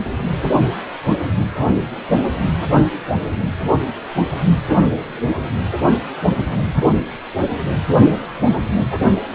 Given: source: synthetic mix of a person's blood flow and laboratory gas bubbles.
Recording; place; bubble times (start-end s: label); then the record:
Doppler ultrasound of blood flow; precordium
1.57-1.75 s: bubbles
2.19-2.46 s: bubbles
3.27-3.49 s: bubbles
6.50-6.66 s: bubbles
8.90-9.04 s: bubbles
From the record:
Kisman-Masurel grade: 121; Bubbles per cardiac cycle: 1 to 2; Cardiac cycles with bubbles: 10 to 50%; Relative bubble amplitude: barely perceptible (0.100 to 0.250); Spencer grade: 2 (many but less than half of the cardiac periods contain bubble signals, singularly or in groups); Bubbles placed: anywhere in the cardiac cycle